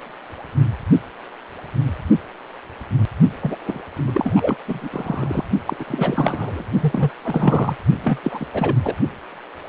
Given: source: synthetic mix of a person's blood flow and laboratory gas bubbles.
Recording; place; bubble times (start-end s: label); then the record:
Doppler ultrasound of blood flow; precordium
3.43-3.56 s: bubbles
3.66-3.81 s: bubbles
4.07-4.56 s: bubbles
4.67-5.45 s: bubbles
5.66-5.76 s: bubbles
5.79-6.63 s: bubbles
6.80-7.11 s: bubbles
7.24-7.75 s: bubbles
8.03-8.19 s: bubbles
8.23-8.46 s: bubbles
8.53-8.76 s: bubbles
8.83-8.95 s: bubbles
From the record:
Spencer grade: 3 (all of the cardiac periods contain showers or single bubble signals, but not dominating or overriding the cardiac motion signals); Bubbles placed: only in the low amplitude regions of the cardiac cycle